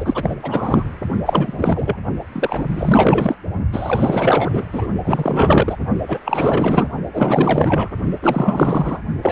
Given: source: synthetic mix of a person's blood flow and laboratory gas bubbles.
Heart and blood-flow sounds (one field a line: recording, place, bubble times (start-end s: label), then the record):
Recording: Doppler ultrasound of blood flow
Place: precordium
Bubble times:
0.00-0.36 s: bubbles
0.42-0.89 s: bubbles
1.25-1.96 s: bubbles
2.32-2.65 s: bubbles
2.70-3.36 s: bubbles
3.72-4.64 s: bubbles
4.72-4.87 s: bubbles
5.04-5.77 s: bubbles
6.08-6.20 s: bubbles
6.25-6.88 s: bubbles
7.13-7.89 s: bubbles
8.22-8.99 s: bubbles
9.22-9.32 s: bubbles
From the record:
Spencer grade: 4 (maximum detectable bubble signal sounding continuously throughout systole and diastole of every cardiac period, and overriding the amplitude of the normal cardiac signals)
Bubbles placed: only in the low amplitude regions of the cardiac cycle